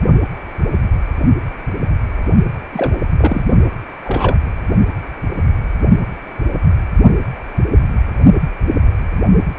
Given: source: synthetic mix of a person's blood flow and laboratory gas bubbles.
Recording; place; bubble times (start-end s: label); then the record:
Doppler ultrasound of blood flow; precordium
2.73-2.95 s: bubbles
3.18-3.44 s: bubbles
4.05-4.36 s: bubbles
From the record:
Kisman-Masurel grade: 222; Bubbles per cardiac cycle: several, 3 to 8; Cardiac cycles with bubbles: 10 to 50%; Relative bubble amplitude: moderate (0.250 to 0.450); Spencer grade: 2 (many but less than half of the cardiac periods contain bubble signals, singularly or in groups); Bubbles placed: only in the low amplitude regions of the cardiac cycle